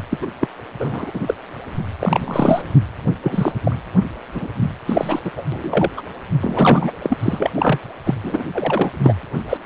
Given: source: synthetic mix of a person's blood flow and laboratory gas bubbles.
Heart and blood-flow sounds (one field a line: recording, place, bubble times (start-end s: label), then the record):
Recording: Doppler ultrasound of blood flow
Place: precordium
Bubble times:
0.10-0.19 s: bubbles
0.21-0.27 s: bubbles
0.40-0.48 s: bubbles
0.79-1.34 s: bubbles
1.99-2.66 s: bubbles
3.23-3.52 s: bubbles
3.63-3.76 s: bubbles
4.34-4.48 s: bubbles
4.60-4.70 s: bubbles
4.86-5.20 s: bubbles
5.24-5.32 s: bubbles
5.37-5.44 s: bubbles
5.52-5.90 s: bubbles
5.97-6.02 s: bubbles
6.41-6.91 s: bubbles
7.02-7.17 s: bubbles
7.23-7.51 s: bubbles
7.55-7.79 s: bubbles
8.04-8.14 s: bubbles
8.23-8.44 s: bubbles
8.52-8.91 s: bubbles
9.04-9.14 s: bubbles
9.49-9.58 s: bubbles
From the record:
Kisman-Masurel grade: 243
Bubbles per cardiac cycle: several, 3 to 8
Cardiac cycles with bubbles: 100%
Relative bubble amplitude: loud (0.450 to 0.775)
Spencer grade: 3 (all of the cardiac periods contain showers or single bubble signals, but not dominating or overriding the cardiac motion signals)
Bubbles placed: anywhere in the cardiac cycle